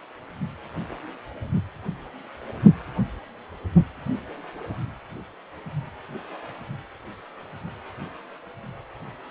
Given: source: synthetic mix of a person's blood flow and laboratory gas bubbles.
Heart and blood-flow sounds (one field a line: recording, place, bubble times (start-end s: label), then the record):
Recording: Doppler ultrasound of blood flow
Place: precordium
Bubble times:
no bubbles
From the record:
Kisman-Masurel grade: 000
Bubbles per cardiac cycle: 0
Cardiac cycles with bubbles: 0%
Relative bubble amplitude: no bubbles discernible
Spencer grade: 0 (complete lack of bubble signals)